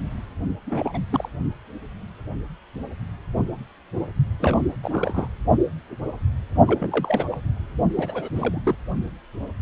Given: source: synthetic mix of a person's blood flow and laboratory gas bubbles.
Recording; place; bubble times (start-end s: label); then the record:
Doppler ultrasound of blood flow; precordium
0.66-0.98 s: bubbles
1.09-1.28 s: bubbles
4.40-4.67 s: bubbles
4.83-5.28 s: bubbles
6.67-7.25 s: bubbles
7.31-7.36 s: bubbles
7.95-8.29 s: bubbles
8.35-8.62 s: bubbles
8.65-8.75 s: bubbles
From the record:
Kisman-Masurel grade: 221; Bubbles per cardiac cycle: several, 3 to 8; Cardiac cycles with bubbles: 10 to 50%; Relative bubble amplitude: barely perceptible (0.100 to 0.250); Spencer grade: 2 (many but less than half of the cardiac periods contain bubble signals, singularly or in groups); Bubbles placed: only in the low amplitude regions of the cardiac cycle